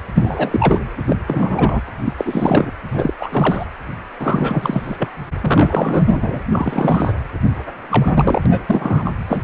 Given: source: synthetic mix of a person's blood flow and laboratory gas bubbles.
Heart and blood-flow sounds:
Doppler ultrasound of blood flow; precordium
0.15-0.81 s: bubbles
1.08-1.16 s: bubbles
1.27-1.82 s: bubbles
2.04-2.12 s: bubbles
2.18-2.72 s: bubbles
2.92-3.14 s: bubbles
3.20-3.65 s: bubbles
4.19-5.08 s: bubbles
5.42-6.44 s: bubbles
6.51-7.13 s: bubbles
7.44-7.50 s: bubbles
7.82-8.41 s: bubbles
8.46-9.11 s: bubbles
9.28-9.44 s: bubbles
From the record:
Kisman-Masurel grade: 333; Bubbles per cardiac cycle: rolling drumbeat, 9 or more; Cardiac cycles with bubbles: 50 to 99%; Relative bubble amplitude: loud (0.450 to 0.775); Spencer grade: 3 (all of the cardiac periods contain showers or single bubble signals, but not dominating or overriding the cardiac motion signals); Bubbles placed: anywhere in the cardiac cycle

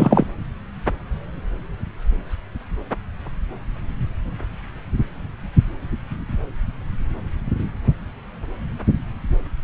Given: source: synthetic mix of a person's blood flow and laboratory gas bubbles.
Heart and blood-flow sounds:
Doppler ultrasound of blood flow; subclavian vein
0.00-0.27 s: bubbles
From the record:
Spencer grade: 2 (many but less than half of the cardiac periods contain bubble signals, singularly or in groups); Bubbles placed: anywhere in the cardiac cycle

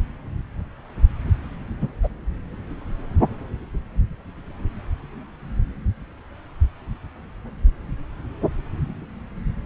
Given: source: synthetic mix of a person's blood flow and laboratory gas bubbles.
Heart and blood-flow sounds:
Doppler ultrasound of blood flow; subclavian vein
1.81-1.88 s: bubbles
2.03-2.08 s: bubbles
From the record:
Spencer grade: 1 (occasional bubble signal discernible with the cardiac motion signal, with majority of cardiac periods free of bubbles); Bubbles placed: anywhere in the cardiac cycle

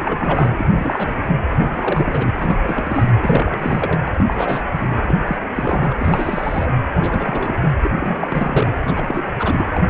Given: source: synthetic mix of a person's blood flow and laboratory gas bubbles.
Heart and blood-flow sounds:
Doppler ultrasound of blood flow; precordium
0.00-0.52 s: bubbles
0.59-0.65 s: bubbles
0.76-1.14 s: bubbles
1.17-1.22 s: bubbles
1.25-1.37 s: bubbles
1.73-2.33 s: bubbles
2.38-2.58 s: bubbles
2.63-3.13 s: bubbles
3.21-3.99 s: bubbles
4.06-4.11 s: bubbles
4.14-4.62 s: bubbles
4.72-4.90 s: bubbles
5.01-5.46 s: bubbles
5.55-5.95 s: bubbles
6.00-6.71 s: bubbles
7.01-7.71 s: bubbles
7.83-7.91 s: bubbles
7.96-8.75 s: bubbles
8.87-9.31 s: bubbles
9.38-9.84 s: bubbles
From the record:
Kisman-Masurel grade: 342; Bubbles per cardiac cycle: rolling drumbeat, 9 or more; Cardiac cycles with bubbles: 100%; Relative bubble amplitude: moderate (0.250 to 0.450); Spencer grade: 3 (all of the cardiac periods contain showers or single bubble signals, but not dominating or overriding the cardiac motion signals); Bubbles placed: anywhere in the cardiac cycle

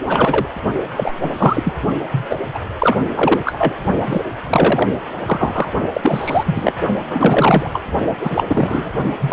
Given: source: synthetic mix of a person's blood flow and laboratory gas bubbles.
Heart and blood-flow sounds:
Doppler ultrasound of blood flow; precordium
0.04-0.48 s: bubbles
0.96-1.79 s: bubbles
2.12-2.26 s: bubbles
2.29-2.38 s: bubbles
2.54-2.60 s: bubbles
2.78-2.97 s: bubbles
3.14-3.41 s: bubbles
3.45-3.73 s: bubbles
4.04-4.21 s: bubbles
4.42-4.89 s: bubbles
5.25-5.71 s: bubbles
5.93-6.72 s: bubbles
7.09-7.70 s: bubbles
7.72-7.82 s: bubbles
8.21-8.45 s: bubbles
8.47-8.90 s: bubbles
9.20-9.33 s: bubbles
From the record:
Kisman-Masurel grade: 343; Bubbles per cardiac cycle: rolling drumbeat, 9 or more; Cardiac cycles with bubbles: 100%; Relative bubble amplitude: loud (0.450 to 0.775); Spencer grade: 3 (all of the cardiac periods contain showers or single bubble signals, but not dominating or overriding the cardiac motion signals); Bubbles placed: only in the low amplitude regions of the cardiac cycle

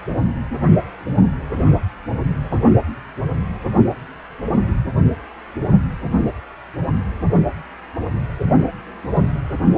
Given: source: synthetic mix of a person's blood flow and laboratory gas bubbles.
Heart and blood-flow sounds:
Doppler ultrasound of blood flow; precordium
1.56-1.63 s: bubbles
2.50-2.56 s: bubbles
From the record:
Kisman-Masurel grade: 112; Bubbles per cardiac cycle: 1 to 2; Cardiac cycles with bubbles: 1 to 10%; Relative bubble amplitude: moderate (0.250 to 0.450); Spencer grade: 1 (occasional bubble signal discernible with the cardiac motion signal, with majority of cardiac periods free of bubbles); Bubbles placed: only in the low amplitude regions of the cardiac cycle

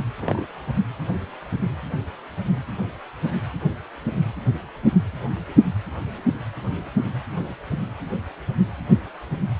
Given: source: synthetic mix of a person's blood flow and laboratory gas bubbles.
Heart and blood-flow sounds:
Doppler ultrasound of blood flow; precordium
0.22-0.46 s: bubbles
From the record:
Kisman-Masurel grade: 121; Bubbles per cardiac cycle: 1 to 2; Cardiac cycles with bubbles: 10 to 50%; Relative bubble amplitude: barely perceptible (0.100 to 0.250); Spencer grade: 2 (many but less than half of the cardiac periods contain bubble signals, singularly or in groups); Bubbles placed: anywhere in the cardiac cycle

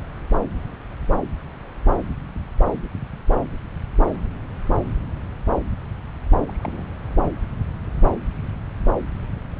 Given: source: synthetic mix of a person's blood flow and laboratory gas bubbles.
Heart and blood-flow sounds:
Doppler ultrasound of blood flow; subclavian vein
6.47-6.86 s: bubbles
From the record:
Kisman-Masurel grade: 111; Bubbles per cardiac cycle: 1 to 2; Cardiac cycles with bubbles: 1 to 10%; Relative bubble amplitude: barely perceptible (0.100 to 0.250); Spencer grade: 1 (occasional bubble signal discernible with the cardiac motion signal, with majority of cardiac periods free of bubbles); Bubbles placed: anywhere in the cardiac cycle

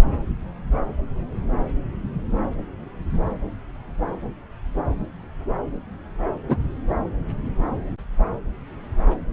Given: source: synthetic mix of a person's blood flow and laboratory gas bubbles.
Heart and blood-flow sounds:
Doppler ultrasound of blood flow; subclavian vein
6.48-6.57 s: bubbles
From the record:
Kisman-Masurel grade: 123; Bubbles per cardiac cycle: 1 to 2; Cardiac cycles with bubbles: 10 to 50%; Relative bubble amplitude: loud (0.450 to 0.775); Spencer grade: 2 (many but less than half of the cardiac periods contain bubble signals, singularly or in groups); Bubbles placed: anywhere in the cardiac cycle

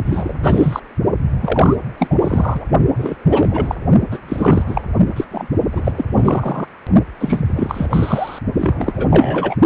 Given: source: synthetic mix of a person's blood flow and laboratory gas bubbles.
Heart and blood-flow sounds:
Doppler ultrasound of blood flow; precordium
0.05-0.80 s: bubbles
1.41-1.75 s: bubbles
1.98-2.08 s: bubbles
2.10-2.17 s: bubbles
2.21-2.65 s: bubbles
2.95-3.17 s: bubbles
3.28-3.75 s: bubbles
4.11-4.20 s: bubbles
4.28-4.64 s: bubbles
4.67-4.82 s: bubbles
5.16-5.25 s: bubbles
5.31-5.47 s: bubbles
5.72-5.92 s: bubbles
5.95-6.05 s: bubbles
6.18-6.67 s: bubbles
7.20-7.86 s: bubbles
7.90-8.39 s: bubbles
8.53-9.08 s: bubbles
9.10-9.55 s: bubbles
From the record:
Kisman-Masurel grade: 343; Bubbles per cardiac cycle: rolling drumbeat, 9 or more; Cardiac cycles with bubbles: 100%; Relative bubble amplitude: loud (0.450 to 0.775); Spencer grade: 3 (all of the cardiac periods contain showers or single bubble signals, but not dominating or overriding the cardiac motion signals); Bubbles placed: only in the low amplitude regions of the cardiac cycle

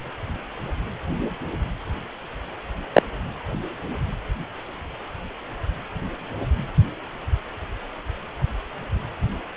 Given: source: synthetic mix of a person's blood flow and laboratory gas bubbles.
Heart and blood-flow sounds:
Doppler ultrasound of blood flow; precordium
2.93-3.02 s: bubbles
From the record:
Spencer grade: 1 (occasional bubble signal discernible with the cardiac motion signal, with majority of cardiac periods free of bubbles); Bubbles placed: anywhere in the cardiac cycle

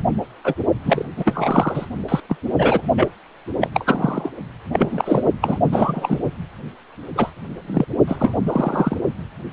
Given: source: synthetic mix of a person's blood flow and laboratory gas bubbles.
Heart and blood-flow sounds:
Doppler ultrasound of blood flow; precordium
0.44-0.55 s: bubbles
0.85-1.08 s: bubbles
1.17-1.86 s: bubbles
2.08-2.21 s: bubbles
2.29-2.36 s: bubbles
2.58-2.81 s: bubbles
2.97-3.12 s: bubbles
3.60-3.69 s: bubbles
3.74-4.32 s: bubbles
4.72-5.24 s: bubbles
5.42-5.60 s: bubbles
5.71-6.18 s: bubbles
7.16-7.32 s: bubbles
7.67-7.85 s: bubbles
8.07-8.16 s: bubbles
8.20-8.36 s: bubbles
8.47-8.97 s: bubbles
From the record:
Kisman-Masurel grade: 233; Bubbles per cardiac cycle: several, 3 to 8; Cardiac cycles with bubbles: 50 to 99%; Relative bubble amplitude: loud (0.450 to 0.775); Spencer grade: 3 (all of the cardiac periods contain showers or single bubble signals, but not dominating or overriding the cardiac motion signals); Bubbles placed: only in the low amplitude regions of the cardiac cycle

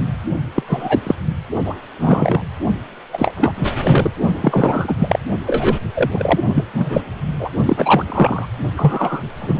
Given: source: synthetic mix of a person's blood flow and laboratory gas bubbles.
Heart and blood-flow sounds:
Doppler ultrasound of blood flow; precordium
0.55-0.63 s: bubbles
0.67-1.01 s: bubbles
1.03-1.15 s: bubbles
1.65-1.76 s: bubbles
1.99-2.43 s: bubbles
3.13-3.32 s: bubbles
3.37-3.68 s: bubbles
3.83-4.10 s: bubbles
4.40-4.96 s: bubbles
4.99-5.19 s: bubbles
5.46-5.77 s: bubbles
5.95-6.39 s: bubbles
6.54-6.64 s: bubbles
6.73-7.01 s: bubbles
7.39-7.49 s: bubbles
7.65-8.48 s: bubbles
8.77-9.23 s: bubbles
9.38-9.60 s: bubbles
From the record:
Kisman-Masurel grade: 243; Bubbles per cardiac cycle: several, 3 to 8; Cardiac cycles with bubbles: 100%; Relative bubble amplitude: loud (0.450 to 0.775); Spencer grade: 3 (all of the cardiac periods contain showers or single bubble signals, but not dominating or overriding the cardiac motion signals); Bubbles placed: only in the low amplitude regions of the cardiac cycle

